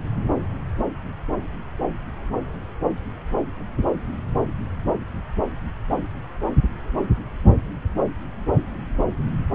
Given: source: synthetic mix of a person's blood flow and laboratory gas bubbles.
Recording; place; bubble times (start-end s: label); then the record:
Doppler ultrasound of blood flow; subclavian vein
no bubbles
From the record:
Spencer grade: 0 (complete lack of bubble signals)